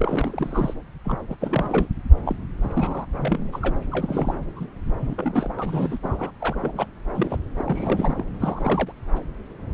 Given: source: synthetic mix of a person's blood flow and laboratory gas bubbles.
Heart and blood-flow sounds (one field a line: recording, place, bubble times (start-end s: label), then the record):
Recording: Doppler ultrasound of blood flow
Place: subclavian vein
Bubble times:
0.00-0.74 s: bubbles
1.05-1.18 s: bubbles
1.30-1.35 s: bubbles
1.41-1.87 s: bubbles
2.25-2.35 s: bubbles
2.62-3.06 s: bubbles
3.18-3.50 s: bubbles
3.52-3.75 s: bubbles
3.91-4.37 s: bubbles
4.55-4.67 s: bubbles
5.00-5.50 s: bubbles
5.58-5.98 s: bubbles
6.03-6.31 s: bubbles
6.38-6.56 s: bubbles
6.60-6.86 s: bubbles
7.13-7.38 s: bubbles
7.58-8.24 s: bubbles
8.40-8.92 s: bubbles
From the record:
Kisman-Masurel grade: 332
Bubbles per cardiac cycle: rolling drumbeat, 9 or more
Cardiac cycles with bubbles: 50 to 99%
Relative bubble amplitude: moderate (0.250 to 0.450)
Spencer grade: 3 (all of the cardiac periods contain showers or single bubble signals, but not dominating or overriding the cardiac motion signals)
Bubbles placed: anywhere in the cardiac cycle